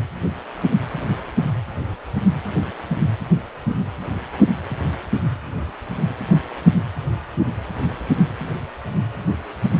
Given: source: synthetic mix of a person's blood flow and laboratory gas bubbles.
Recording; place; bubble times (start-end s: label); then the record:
Doppler ultrasound of blood flow; precordium
no bubbles
From the record:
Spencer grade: 0 (complete lack of bubble signals)